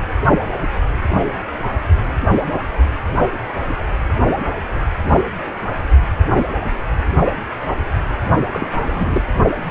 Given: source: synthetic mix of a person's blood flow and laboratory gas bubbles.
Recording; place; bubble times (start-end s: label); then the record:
Doppler ultrasound of blood flow; precordium
8.50-8.68 s: bubbles
8.74-9.22 s: bubbles
From the record:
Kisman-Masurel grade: 212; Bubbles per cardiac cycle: several, 3 to 8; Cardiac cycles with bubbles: 1 to 10%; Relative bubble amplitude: moderate (0.250 to 0.450); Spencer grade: 1 (occasional bubble signal discernible with the cardiac motion signal, with majority of cardiac periods free of bubbles); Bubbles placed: only in the low amplitude regions of the cardiac cycle